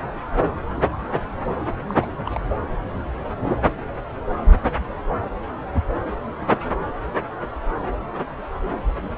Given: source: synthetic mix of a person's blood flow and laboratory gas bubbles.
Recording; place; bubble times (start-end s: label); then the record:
Doppler ultrasound of blood flow; subclavian vein
1.88-1.94 s: bubbles
2.00-2.06 s: bubbles
2.17-2.40 s: bubbles
From the record:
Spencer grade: 1 (occasional bubble signal discernible with the cardiac motion signal, with majority of cardiac periods free of bubbles); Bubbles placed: anywhere in the cardiac cycle